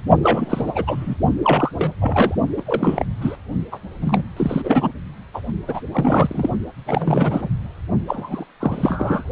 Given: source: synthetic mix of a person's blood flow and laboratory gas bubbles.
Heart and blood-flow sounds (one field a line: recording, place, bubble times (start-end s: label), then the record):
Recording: Doppler ultrasound of blood flow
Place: precordium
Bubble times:
0.23-1.16 s: bubbles
1.43-1.72 s: bubbles
1.75-1.91 s: bubbles
2.01-2.35 s: bubbles
2.56-2.62 s: bubbles
2.66-3.05 s: bubbles
3.20-3.35 s: bubbles
3.71-3.78 s: bubbles
4.02-4.23 s: bubbles
4.36-4.62 s: bubbles
4.64-4.91 s: bubbles
5.33-5.42 s: bubbles
5.67-5.82 s: bubbles
5.92-6.50 s: bubbles
6.86-7.50 s: bubbles
8.08-8.44 s: bubbles
8.60-9.23 s: bubbles
From the record:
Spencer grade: 3 (all of the cardiac periods contain showers or single bubble signals, but not dominating or overriding the cardiac motion signals)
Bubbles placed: only in the low amplitude regions of the cardiac cycle